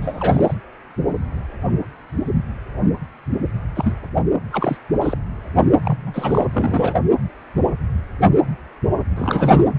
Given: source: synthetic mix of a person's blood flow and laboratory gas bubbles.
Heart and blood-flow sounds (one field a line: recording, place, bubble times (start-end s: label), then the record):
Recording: Doppler ultrasound of blood flow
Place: precordium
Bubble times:
0.01-0.54 s: bubbles
3.75-3.93 s: bubbles
4.52-4.77 s: bubbles
5.01-5.18 s: bubbles
5.83-6.46 s: bubbles
6.53-6.94 s: bubbles
9.16-9.64 s: bubbles
From the record:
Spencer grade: 3 (all of the cardiac periods contain showers or single bubble signals, but not dominating or overriding the cardiac motion signals)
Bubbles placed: anywhere in the cardiac cycle